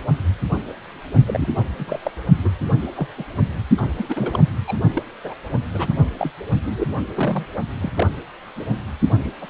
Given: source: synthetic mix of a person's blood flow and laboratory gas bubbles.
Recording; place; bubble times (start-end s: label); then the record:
Doppler ultrasound of blood flow; precordium
1.26-1.48 s: bubbles
1.77-2.00 s: bubbles
2.04-2.11 s: bubbles
2.44-2.50 s: bubbles
2.97-3.08 s: bubbles
3.18-3.24 s: bubbles
3.77-3.81 s: bubbles
3.98-4.42 s: bubbles
4.67-4.77 s: bubbles
4.95-5.03 s: bubbles
5.24-5.34 s: bubbles
5.49-5.58 s: bubbles
5.74-5.94 s: bubbles
6.19-6.31 s: bubbles
6.66-6.88 s: bubbles
7.14-7.46 s: bubbles
7.81-7.92 s: bubbles
7.94-8.06 s: bubbles
8.56-8.64 s: bubbles
9.19-9.30 s: bubbles
9.41-9.50 s: bubbles
From the record:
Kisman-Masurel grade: 232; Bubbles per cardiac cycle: several, 3 to 8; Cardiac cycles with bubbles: 50 to 99%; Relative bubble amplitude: moderate (0.250 to 0.450); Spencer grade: 3 (all of the cardiac periods contain showers or single bubble signals, but not dominating or overriding the cardiac motion signals); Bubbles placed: only in the low amplitude regions of the cardiac cycle